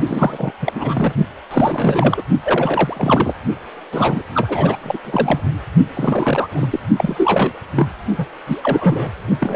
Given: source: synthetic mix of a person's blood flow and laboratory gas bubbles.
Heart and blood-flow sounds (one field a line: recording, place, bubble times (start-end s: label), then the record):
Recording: Doppler ultrasound of blood flow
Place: precordium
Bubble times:
0.07-0.53 s: bubbles
0.62-1.12 s: bubbles
1.50-2.22 s: bubbles
2.43-3.34 s: bubbles
3.92-4.23 s: bubbles
4.34-4.77 s: bubbles
4.83-4.98 s: bubbles
5.04-5.41 s: bubbles
5.94-6.79 s: bubbles
6.96-7.53 s: bubbles
7.75-7.87 s: bubbles
8.18-8.26 s: bubbles
8.46-9.12 s: bubbles
9.40-9.56 s: bubbles
From the record:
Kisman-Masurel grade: 342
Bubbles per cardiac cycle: rolling drumbeat, 9 or more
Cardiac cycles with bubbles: 100%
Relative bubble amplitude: moderate (0.250 to 0.450)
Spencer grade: 3 (all of the cardiac periods contain showers or single bubble signals, but not dominating or overriding the cardiac motion signals)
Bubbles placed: only in the low amplitude regions of the cardiac cycle